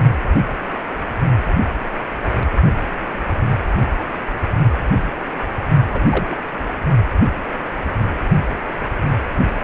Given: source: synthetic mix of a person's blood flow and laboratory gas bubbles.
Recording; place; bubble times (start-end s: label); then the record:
Doppler ultrasound of blood flow; precordium
5.91-6.41 s: bubbles
From the record:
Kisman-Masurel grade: 222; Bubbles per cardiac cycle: several, 3 to 8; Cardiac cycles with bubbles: 10 to 50%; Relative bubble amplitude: moderate (0.250 to 0.450); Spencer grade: 2 (many but less than half of the cardiac periods contain bubble signals, singularly or in groups); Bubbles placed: only in the low amplitude regions of the cardiac cycle